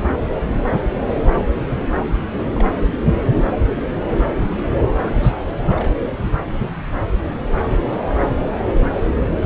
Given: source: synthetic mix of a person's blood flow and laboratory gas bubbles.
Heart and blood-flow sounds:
Doppler ultrasound of blood flow; subclavian vein
0.10-0.20 s: bubbles
2.38-2.65 s: bubbles
2.82-2.88 s: bubbles
4.71-4.74 s: bubbles
5.06-5.12 s: bubbles
5.16-5.41 s: bubbles
5.46-5.49 s: bubbles
5.67-5.92 s: bubbles
From the record:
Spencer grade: 2 (many but less than half of the cardiac periods contain bubble signals, singularly or in groups); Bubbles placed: anywhere in the cardiac cycle

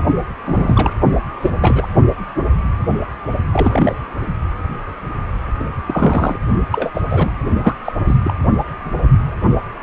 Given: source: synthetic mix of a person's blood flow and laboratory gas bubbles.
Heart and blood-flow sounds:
Doppler ultrasound of blood flow; precordium
0.46-0.95 s: bubbles
1.41-1.50 s: bubbles
1.61-1.87 s: bubbles
3.52-3.94 s: bubbles
5.59-5.64 s: bubbles
5.86-6.38 s: bubbles
6.71-6.91 s: bubbles
6.94-7.01 s: bubbles
7.09-7.30 s: bubbles
7.60-7.75 s: bubbles
7.84-7.92 s: bubbles
8.07-8.19 s: bubbles
8.24-8.34 s: bubbles
From the record:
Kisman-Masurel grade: 232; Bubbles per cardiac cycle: several, 3 to 8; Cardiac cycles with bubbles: 50 to 99%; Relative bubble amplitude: moderate (0.250 to 0.450); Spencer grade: 3 (all of the cardiac periods contain showers or single bubble signals, but not dominating or overriding the cardiac motion signals); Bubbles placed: only in the low amplitude regions of the cardiac cycle

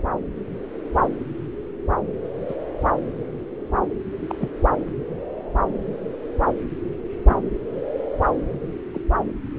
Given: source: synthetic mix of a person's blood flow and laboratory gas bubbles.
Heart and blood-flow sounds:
Doppler ultrasound of blood flow; subclavian vein
2.48-2.54 s: bubbles
4.28-4.35 s: bubbles
4.39-4.49 s: bubbles
6.47-6.51 s: bubbles
7.29-7.36 s: bubbles
8.93-9.01 s: bubbles
From the record:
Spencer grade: 2 (many but less than half of the cardiac periods contain bubble signals, singularly or in groups); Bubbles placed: anywhere in the cardiac cycle

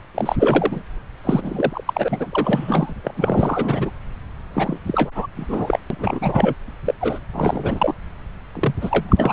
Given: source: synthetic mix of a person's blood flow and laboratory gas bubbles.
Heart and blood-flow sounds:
Doppler ultrasound of blood flow; subclavian vein
0.15-0.36 s: bubbles
0.39-0.82 s: bubbles
1.23-1.84 s: bubbles
1.86-2.94 s: bubbles
3.04-3.15 s: bubbles
3.17-3.90 s: bubbles
4.55-4.78 s: bubbles
4.86-5.11 s: bubbles
5.15-5.27 s: bubbles
5.36-5.79 s: bubbles
5.90-6.54 s: bubbles
6.84-6.94 s: bubbles
7.00-7.19 s: bubbles
7.33-7.94 s: bubbles
8.55-8.74 s: bubbles
8.81-9.33 s: bubbles
From the record:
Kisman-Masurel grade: 332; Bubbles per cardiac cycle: rolling drumbeat, 9 or more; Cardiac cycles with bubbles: 50 to 99%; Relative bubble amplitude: moderate (0.250 to 0.450); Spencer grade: 3 (all of the cardiac periods contain showers or single bubble signals, but not dominating or overriding the cardiac motion signals); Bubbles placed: anywhere in the cardiac cycle

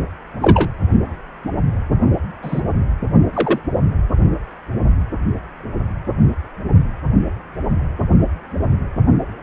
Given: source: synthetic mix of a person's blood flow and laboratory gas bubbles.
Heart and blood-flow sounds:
Doppler ultrasound of blood flow; precordium
0.41-0.70 s: bubbles
2.42-2.61 s: bubbles
3.33-3.59 s: bubbles
From the record:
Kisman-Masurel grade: 123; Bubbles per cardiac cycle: 1 to 2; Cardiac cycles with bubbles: 10 to 50%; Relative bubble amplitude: loud (0.450 to 0.775); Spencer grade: 2 (many but less than half of the cardiac periods contain bubble signals, singularly or in groups); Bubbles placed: only in the low amplitude regions of the cardiac cycle

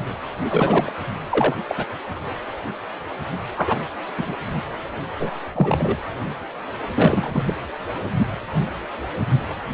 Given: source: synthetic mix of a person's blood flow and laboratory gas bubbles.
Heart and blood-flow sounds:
Doppler ultrasound of blood flow; precordium
0.44-0.93 s: bubbles
1.30-1.55 s: bubbles
1.68-1.86 s: bubbles
3.57-3.79 s: bubbles
4.17-4.35 s: bubbles
5.19-5.30 s: bubbles
5.54-5.97 s: bubbles
6.94-7.54 s: bubbles
From the record:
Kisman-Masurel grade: 222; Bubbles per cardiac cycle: several, 3 to 8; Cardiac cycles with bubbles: 10 to 50%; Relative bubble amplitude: moderate (0.250 to 0.450); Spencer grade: 2 (many but less than half of the cardiac periods contain bubble signals, singularly or in groups); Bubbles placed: anywhere in the cardiac cycle

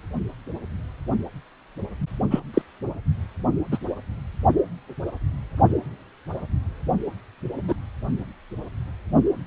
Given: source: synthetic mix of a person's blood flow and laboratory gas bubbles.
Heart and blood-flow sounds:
Doppler ultrasound of blood flow; precordium
2.30-2.40 s: bubbles
2.54-2.62 s: bubbles
3.71-3.78 s: bubbles
7.68-7.74 s: bubbles
From the record:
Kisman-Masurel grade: 123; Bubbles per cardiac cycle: 1 to 2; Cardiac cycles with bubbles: 10 to 50%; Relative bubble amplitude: loud (0.450 to 0.775); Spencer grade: 2 (many but less than half of the cardiac periods contain bubble signals, singularly or in groups); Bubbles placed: only in the low amplitude regions of the cardiac cycle

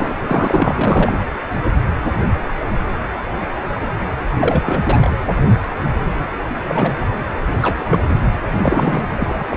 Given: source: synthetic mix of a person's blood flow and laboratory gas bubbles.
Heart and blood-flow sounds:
Doppler ultrasound of blood flow; precordium
0.00-0.14 s: bubbles
0.20-1.15 s: bubbles
4.39-5.10 s: bubbles
6.64-6.97 s: bubbles
7.62-8.03 s: bubbles
8.62-9.04 s: bubbles
9.16-9.46 s: bubbles
9.50-9.57 s: bubbles
From the record:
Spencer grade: 2 (many but less than half of the cardiac periods contain bubble signals, singularly or in groups); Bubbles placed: anywhere in the cardiac cycle

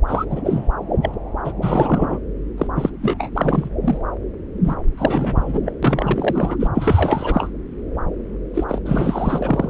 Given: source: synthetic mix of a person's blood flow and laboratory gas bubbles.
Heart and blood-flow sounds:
Doppler ultrasound of blood flow; subclavian vein
0.07-0.24 s: bubbles
0.30-0.41 s: bubbles
0.45-0.70 s: bubbles
1.01-1.14 s: bubbles
1.44-1.52 s: bubbles
1.61-2.19 s: bubbles
2.58-2.67 s: bubbles
2.76-2.90 s: bubbles
3.02-3.31 s: bubbles
3.35-3.70 s: bubbles
3.83-3.98 s: bubbles
4.63-4.75 s: bubbles
4.97-5.60 s: bubbles
5.63-5.75 s: bubbles
5.82-6.56 s: bubbles
6.59-6.67 s: bubbles
6.74-7.49 s: bubbles
8.54-8.64 s: bubbles
8.69-8.81 s: bubbles
8.85-9.70 s: bubbles
From the record:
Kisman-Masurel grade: 342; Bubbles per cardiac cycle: rolling drumbeat, 9 or more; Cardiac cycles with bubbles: 100%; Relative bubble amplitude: moderate (0.250 to 0.450); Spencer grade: 3 (all of the cardiac periods contain showers or single bubble signals, but not dominating or overriding the cardiac motion signals); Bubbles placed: anywhere in the cardiac cycle

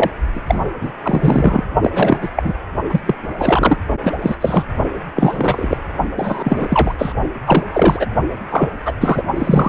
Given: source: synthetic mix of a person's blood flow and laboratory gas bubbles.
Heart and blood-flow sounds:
Doppler ultrasound of blood flow; precordium
0.00-0.10 s: bubbles
0.35-0.40 s: bubbles
0.46-0.66 s: bubbles
0.81-0.91 s: bubbles
1.02-1.68 s: bubbles
1.82-2.18 s: bubbles
2.22-2.29 s: bubbles
2.35-2.54 s: bubbles
2.89-3.00 s: bubbles
3.06-3.15 s: bubbles
3.38-3.77 s: bubbles
4.04-4.12 s: bubbles
4.22-4.37 s: bubbles
4.41-4.63 s: bubbles
5.16-5.77 s: bubbles
6.16-6.95 s: bubbles
6.98-7.12 s: bubbles
7.46-7.63 s: bubbles
7.73-8.06 s: bubbles
8.50-8.70 s: bubbles
8.85-8.93 s: bubbles
9.00-9.23 s: bubbles
9.35-9.69 s: bubbles
From the record:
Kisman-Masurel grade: 333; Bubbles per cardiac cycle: rolling drumbeat, 9 or more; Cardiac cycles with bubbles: 50 to 99%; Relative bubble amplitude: loud (0.450 to 0.775); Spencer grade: 3 (all of the cardiac periods contain showers or single bubble signals, but not dominating or overriding the cardiac motion signals); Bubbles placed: only in the low amplitude regions of the cardiac cycle

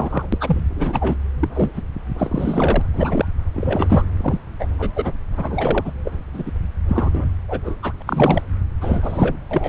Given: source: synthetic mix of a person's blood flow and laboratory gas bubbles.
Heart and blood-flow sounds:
Doppler ultrasound of blood flow; subclavian vein
0.00-0.27 s: bubbles
0.32-0.61 s: bubbles
0.76-1.17 s: bubbles
1.40-1.48 s: bubbles
1.53-1.81 s: bubbles
2.17-2.81 s: bubbles
2.93-3.25 s: bubbles
3.54-4.04 s: bubbles
4.17-4.42 s: bubbles
4.59-4.67 s: bubbles
4.78-4.91 s: bubbles
4.95-5.19 s: bubbles
5.37-5.92 s: bubbles
6.05-6.12 s: bubbles
6.34-6.43 s: bubbles
6.46-6.52 s: bubbles
6.89-7.26 s: bubbles
7.48-7.61 s: bubbles
7.64-7.75 s: bubbles
7.82-7.93 s: bubbles
8.00-8.03 s: bubbles
8.07-8.42 s: bubbles
8.80-9.37 s: bubbles
9.51-9.69 s: bubbles
From the record:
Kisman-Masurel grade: 243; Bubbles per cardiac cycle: several, 3 to 8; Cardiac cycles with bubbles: 100%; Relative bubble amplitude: loud (0.450 to 0.775); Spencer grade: 3 (all of the cardiac periods contain showers or single bubble signals, but not dominating or overriding the cardiac motion signals); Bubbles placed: anywhere in the cardiac cycle

